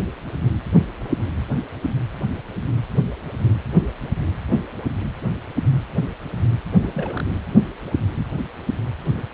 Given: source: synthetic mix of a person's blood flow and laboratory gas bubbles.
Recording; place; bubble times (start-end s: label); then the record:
Doppler ultrasound of blood flow; precordium
6.82-7.23 s: bubbles
From the record:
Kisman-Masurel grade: 211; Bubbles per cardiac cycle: several, 3 to 8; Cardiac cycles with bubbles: 1 to 10%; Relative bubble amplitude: barely perceptible (0.100 to 0.250); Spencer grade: 1 (occasional bubble signal discernible with the cardiac motion signal, with majority of cardiac periods free of bubbles); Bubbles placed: anywhere in the cardiac cycle